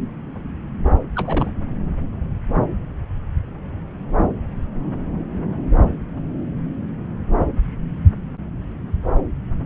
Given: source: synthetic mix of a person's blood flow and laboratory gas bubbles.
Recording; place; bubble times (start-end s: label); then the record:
Doppler ultrasound of blood flow; subclavian vein
1.15-1.50 s: bubbles
From the record:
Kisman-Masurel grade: 211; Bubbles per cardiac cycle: several, 3 to 8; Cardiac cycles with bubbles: 1 to 10%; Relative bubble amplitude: barely perceptible (0.100 to 0.250); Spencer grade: 1 (occasional bubble signal discernible with the cardiac motion signal, with majority of cardiac periods free of bubbles); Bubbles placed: anywhere in the cardiac cycle